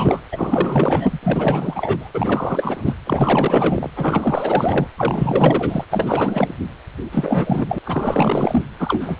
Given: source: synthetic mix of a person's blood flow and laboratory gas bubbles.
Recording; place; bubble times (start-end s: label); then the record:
Doppler ultrasound of blood flow; precordium
0.00-0.21 s: bubbles
0.32-1.20 s: bubbles
1.23-2.09 s: bubbles
2.15-2.95 s: bubbles
3.06-3.91 s: bubbles
3.96-4.87 s: bubbles
4.97-5.85 s: bubbles
5.91-6.55 s: bubbles
7.12-7.79 s: bubbles
7.85-8.65 s: bubbles
8.79-9.20 s: bubbles
From the record:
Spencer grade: 4 (maximum detectable bubble signal sounding continuously throughout systole and diastole of every cardiac period, and overriding the amplitude of the normal cardiac signals); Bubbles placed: anywhere in the cardiac cycle